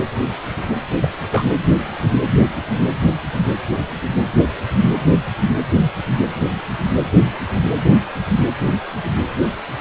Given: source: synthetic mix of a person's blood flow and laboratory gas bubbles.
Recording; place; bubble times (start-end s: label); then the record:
Doppler ultrasound of blood flow; precordium
1.02-1.10 s: bubbles
1.32-1.43 s: bubbles
From the record:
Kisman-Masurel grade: 112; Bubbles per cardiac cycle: 1 to 2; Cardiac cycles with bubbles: 1 to 10%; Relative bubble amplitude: moderate (0.250 to 0.450); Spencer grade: 1 (occasional bubble signal discernible with the cardiac motion signal, with majority of cardiac periods free of bubbles); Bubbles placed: anywhere in the cardiac cycle